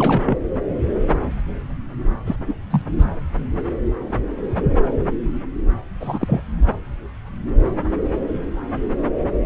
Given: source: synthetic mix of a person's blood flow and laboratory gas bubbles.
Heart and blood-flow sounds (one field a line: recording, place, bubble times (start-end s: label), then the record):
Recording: Doppler ultrasound of blood flow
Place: subclavian vein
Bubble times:
0.00-0.39 s: bubbles
2.26-2.36 s: bubbles
2.47-2.55 s: bubbles
2.70-2.81 s: bubbles
2.98-3.04 s: bubbles
6.00-6.42 s: bubbles
From the record:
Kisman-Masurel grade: 232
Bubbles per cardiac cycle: several, 3 to 8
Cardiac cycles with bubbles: 50 to 99%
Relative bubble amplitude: moderate (0.250 to 0.450)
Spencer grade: 3 (all of the cardiac periods contain showers or single bubble signals, but not dominating or overriding the cardiac motion signals)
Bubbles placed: anywhere in the cardiac cycle